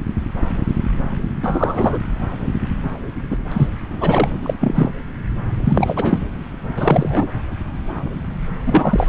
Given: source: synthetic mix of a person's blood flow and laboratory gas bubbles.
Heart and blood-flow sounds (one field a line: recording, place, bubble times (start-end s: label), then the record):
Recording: Doppler ultrasound of blood flow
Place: subclavian vein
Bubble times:
1.43-1.98 s: bubbles
3.30-3.37 s: bubbles
3.49-3.67 s: bubbles
4.00-4.29 s: bubbles
4.42-4.54 s: bubbles
4.61-4.92 s: bubbles
5.64-6.18 s: bubbles
6.76-7.28 s: bubbles
8.65-9.09 s: bubbles
From the record:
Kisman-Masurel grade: 223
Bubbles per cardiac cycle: several, 3 to 8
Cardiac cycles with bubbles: 10 to 50%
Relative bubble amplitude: loud (0.450 to 0.775)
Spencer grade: 2 (many but less than half of the cardiac periods contain bubble signals, singularly or in groups)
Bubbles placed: anywhere in the cardiac cycle